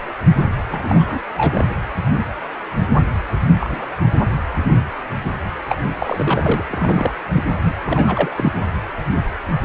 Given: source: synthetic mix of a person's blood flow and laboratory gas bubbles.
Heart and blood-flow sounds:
Doppler ultrasound of blood flow; precordium
0.70-1.19 s: bubbles
1.37-1.65 s: bubbles
3.60-3.90 s: bubbles
5.69-5.78 s: bubbles
5.99-6.63 s: bubbles
6.70-7.14 s: bubbles
7.36-7.46 s: bubbles
7.51-7.75 s: bubbles
7.86-8.30 s: bubbles
8.35-8.52 s: bubbles
From the record:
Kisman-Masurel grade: 222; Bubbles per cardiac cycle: several, 3 to 8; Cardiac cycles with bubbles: 10 to 50%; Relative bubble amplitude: moderate (0.250 to 0.450); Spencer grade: 2 (many but less than half of the cardiac periods contain bubble signals, singularly or in groups); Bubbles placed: anywhere in the cardiac cycle

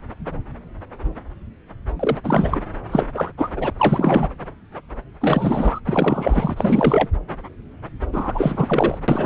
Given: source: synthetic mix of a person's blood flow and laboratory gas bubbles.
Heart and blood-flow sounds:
Doppler ultrasound of blood flow; subclavian vein
1.99-2.17 s: bubbles
2.24-2.62 s: bubbles
2.91-3.06 s: bubbles
3.14-3.31 s: bubbles
3.38-3.48 s: bubbles
3.56-3.70 s: bubbles
3.77-4.30 s: bubbles
5.21-5.80 s: bubbles
5.85-7.08 s: bubbles
8.12-8.98 s: bubbles
9.08-9.26 s: bubbles
From the record:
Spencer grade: 3 (all of the cardiac periods contain showers or single bubble signals, but not dominating or overriding the cardiac motion signals); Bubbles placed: anywhere in the cardiac cycle

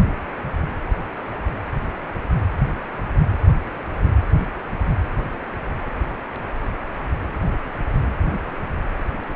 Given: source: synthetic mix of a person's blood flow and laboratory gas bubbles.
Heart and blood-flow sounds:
Doppler ultrasound of blood flow; precordium
no bubbles
From the record:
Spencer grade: 0 (complete lack of bubble signals)

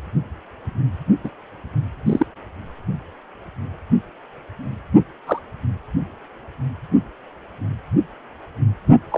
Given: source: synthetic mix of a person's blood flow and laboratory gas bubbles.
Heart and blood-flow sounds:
Doppler ultrasound of blood flow; precordium
1.24-1.30 s: bubbles
2.06-2.26 s: bubbles
5.27-5.39 s: bubbles
9.11-9.18 s: bubbles
From the record:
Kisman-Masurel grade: 122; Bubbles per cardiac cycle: 1 to 2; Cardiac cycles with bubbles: 10 to 50%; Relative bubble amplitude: moderate (0.250 to 0.450); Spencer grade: 2 (many but less than half of the cardiac periods contain bubble signals, singularly or in groups); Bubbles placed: anywhere in the cardiac cycle

